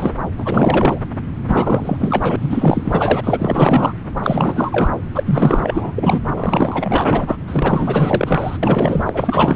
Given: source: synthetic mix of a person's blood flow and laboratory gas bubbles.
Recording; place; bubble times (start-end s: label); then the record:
Doppler ultrasound of blood flow; subclavian vein
0.00-0.16 s: bubbles
0.38-0.99 s: bubbles
1.47-2.36 s: bubbles
2.41-3.21 s: bubbles
3.23-3.93 s: bubbles
4.23-4.91 s: bubbles
5.14-5.92 s: bubbles
5.95-6.21 s: bubbles
6.36-7.37 s: bubbles
7.47-8.59 s: bubbles
8.62-9.56 s: bubbles
From the record:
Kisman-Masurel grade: 444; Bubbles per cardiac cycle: continuous sound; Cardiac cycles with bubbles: 100%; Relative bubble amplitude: maximal (0.775 to 0.999); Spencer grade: 4 (maximum detectable bubble signal sounding continuously throughout systole and diastole of every cardiac period, and overriding the amplitude of the normal cardiac signals); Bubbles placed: anywhere in the cardiac cycle